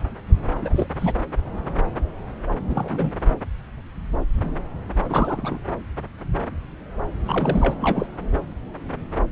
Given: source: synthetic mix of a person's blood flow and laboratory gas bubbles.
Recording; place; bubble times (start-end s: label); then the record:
Doppler ultrasound of blood flow; subclavian vein
0.61-0.86 s: bubbles
0.99-1.14 s: bubbles
2.69-3.12 s: bubbles
5.09-5.59 s: bubbles
7.24-7.76 s: bubbles
7.80-8.06 s: bubbles
From the record:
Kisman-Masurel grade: 222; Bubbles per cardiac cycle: several, 3 to 8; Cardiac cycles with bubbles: 10 to 50%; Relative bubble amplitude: moderate (0.250 to 0.450); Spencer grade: 2 (many but less than half of the cardiac periods contain bubble signals, singularly or in groups); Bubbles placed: anywhere in the cardiac cycle